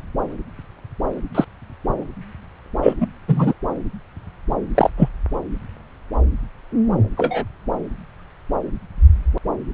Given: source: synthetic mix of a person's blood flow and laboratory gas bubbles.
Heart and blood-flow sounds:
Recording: Doppler ultrasound of blood flow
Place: subclavian vein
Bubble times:
1.34-1.45 s: bubbles
2.82-2.94 s: bubbles
3.00-3.07 s: bubbles
3.28-3.54 s: bubbles
4.75-4.90 s: bubbles
4.97-5.09 s: bubbles
7.17-7.45 s: bubbles
From the record:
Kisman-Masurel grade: 123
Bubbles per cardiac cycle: 1 to 2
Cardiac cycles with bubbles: 10 to 50%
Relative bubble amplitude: loud (0.450 to 0.775)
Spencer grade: 2 (many but less than half of the cardiac periods contain bubble signals, singularly or in groups)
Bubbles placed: anywhere in the cardiac cycle

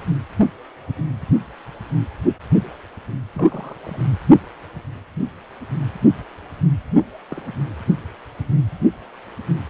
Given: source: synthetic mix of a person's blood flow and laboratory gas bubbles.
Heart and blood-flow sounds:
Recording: Doppler ultrasound of blood flow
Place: precordium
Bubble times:
3.33-3.77 s: bubbles
3.83-4.07 s: bubbles
7.30-7.43 s: bubbles
From the record:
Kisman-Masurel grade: 121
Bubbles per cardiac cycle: 1 to 2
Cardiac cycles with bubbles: 10 to 50%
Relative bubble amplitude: barely perceptible (0.100 to 0.250)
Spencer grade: 2 (many but less than half of the cardiac periods contain bubble signals, singularly or in groups)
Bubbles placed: only in the low amplitude regions of the cardiac cycle

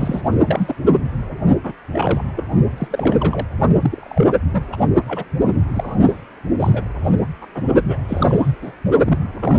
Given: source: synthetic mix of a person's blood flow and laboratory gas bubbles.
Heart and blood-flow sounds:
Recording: Doppler ultrasound of blood flow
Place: precordium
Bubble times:
0.00-0.21 s: bubbles
0.32-0.38 s: bubbles
0.45-0.75 s: bubbles
1.63-1.72 s: bubbles
1.93-2.25 s: bubbles
2.35-2.44 s: bubbles
2.77-3.47 s: bubbles
3.82-4.26 s: bubbles
4.52-4.65 s: bubbles
4.72-4.77 s: bubbles
5.07-5.25 s: bubbles
5.73-5.96 s: bubbles
6.02-6.17 s: bubbles
6.59-6.83 s: bubbles
7.04-7.12 s: bubbles
7.42-7.46 s: bubbles
7.54-7.62 s: bubbles
7.87-7.97 s: bubbles
8.08-8.53 s: bubbles
8.62-8.72 s: bubbles
9.05-9.18 s: bubbles
9.40-9.59 s: bubbles
From the record:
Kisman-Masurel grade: 242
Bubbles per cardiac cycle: several, 3 to 8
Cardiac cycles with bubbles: 100%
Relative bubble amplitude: moderate (0.250 to 0.450)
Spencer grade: 3 (all of the cardiac periods contain showers or single bubble signals, but not dominating or overriding the cardiac motion signals)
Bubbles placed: only in the low amplitude regions of the cardiac cycle

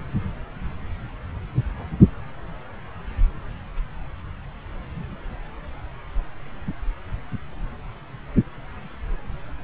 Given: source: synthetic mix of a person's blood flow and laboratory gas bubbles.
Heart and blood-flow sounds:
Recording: Doppler ultrasound of blood flow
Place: subclavian vein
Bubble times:
no bubbles
From the record:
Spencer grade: 0 (complete lack of bubble signals)

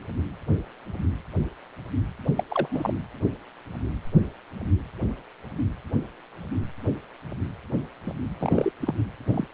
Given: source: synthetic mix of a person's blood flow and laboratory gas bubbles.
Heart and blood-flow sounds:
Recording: Doppler ultrasound of blood flow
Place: precordium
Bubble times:
2.37-2.44 s: bubbles
2.50-2.68 s: bubbles
2.71-2.94 s: bubbles
8.06-8.11 s: bubbles
8.40-8.72 s: bubbles
8.82-8.93 s: bubbles
9.32-9.47 s: bubbles
From the record:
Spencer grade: 2 (many but less than half of the cardiac periods contain bubble signals, singularly or in groups)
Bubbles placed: anywhere in the cardiac cycle

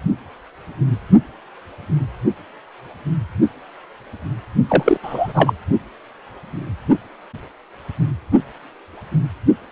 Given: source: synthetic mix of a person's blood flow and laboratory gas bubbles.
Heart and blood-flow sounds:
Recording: Doppler ultrasound of blood flow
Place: precordium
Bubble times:
4.68-4.98 s: bubbles
5.03-5.54 s: bubbles
From the record:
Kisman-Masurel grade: 213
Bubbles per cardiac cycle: several, 3 to 8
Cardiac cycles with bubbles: 1 to 10%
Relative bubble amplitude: loud (0.450 to 0.775)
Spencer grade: 1 (occasional bubble signal discernible with the cardiac motion signal, with majority of cardiac periods free of bubbles)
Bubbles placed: only in the low amplitude regions of the cardiac cycle

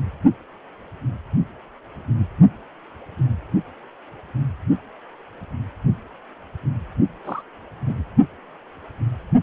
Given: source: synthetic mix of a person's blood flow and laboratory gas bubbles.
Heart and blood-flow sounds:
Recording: Doppler ultrasound of blood flow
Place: precordium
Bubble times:
7.24-7.42 s: bubbles
7.87-8.03 s: bubbles
From the record:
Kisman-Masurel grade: 111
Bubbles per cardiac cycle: 1 to 2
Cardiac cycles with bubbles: 1 to 10%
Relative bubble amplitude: barely perceptible (0.100 to 0.250)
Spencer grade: 1 (occasional bubble signal discernible with the cardiac motion signal, with majority of cardiac periods free of bubbles)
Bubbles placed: only in the low amplitude regions of the cardiac cycle

